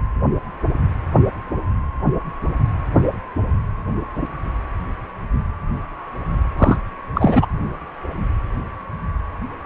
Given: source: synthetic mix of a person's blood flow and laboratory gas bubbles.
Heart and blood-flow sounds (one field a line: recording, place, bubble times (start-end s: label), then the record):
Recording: Doppler ultrasound of blood flow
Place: precordium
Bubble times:
6.58-6.79 s: bubbles
7.15-7.46 s: bubbles
From the record:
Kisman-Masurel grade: 213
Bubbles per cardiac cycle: several, 3 to 8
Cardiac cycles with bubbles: 1 to 10%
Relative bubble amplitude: loud (0.450 to 0.775)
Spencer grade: 1 (occasional bubble signal discernible with the cardiac motion signal, with majority of cardiac periods free of bubbles)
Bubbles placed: anywhere in the cardiac cycle